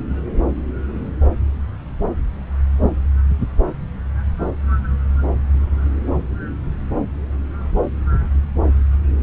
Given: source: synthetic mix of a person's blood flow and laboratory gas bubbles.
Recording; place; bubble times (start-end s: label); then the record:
Doppler ultrasound of blood flow; subclavian vein
no bubbles
From the record:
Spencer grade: 0 (complete lack of bubble signals)